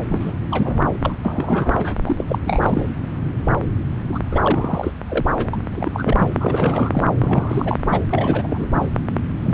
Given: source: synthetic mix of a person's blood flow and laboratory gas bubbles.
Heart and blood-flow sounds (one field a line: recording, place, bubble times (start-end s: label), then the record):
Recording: Doppler ultrasound of blood flow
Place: subclavian vein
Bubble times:
0.09-0.32 s: bubbles
0.51-0.84 s: bubbles
1.03-1.16 s: bubbles
1.25-1.94 s: bubbles
2.06-2.24 s: bubbles
2.27-2.38 s: bubbles
2.45-2.88 s: bubbles
4.12-4.19 s: bubbles
4.31-4.91 s: bubbles
5.08-5.25 s: bubbles
5.37-5.50 s: bubbles
5.53-5.57 s: bubbles
5.71-5.91 s: bubbles
5.93-6.29 s: bubbles
6.40-7.01 s: bubbles
7.18-7.77 s: bubbles
7.84-8.05 s: bubbles
8.09-8.70 s: bubbles
8.80-8.87 s: bubbles
9.44-9.54 s: bubbles
From the record:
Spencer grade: 3 (all of the cardiac periods contain showers or single bubble signals, but not dominating or overriding the cardiac motion signals)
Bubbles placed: anywhere in the cardiac cycle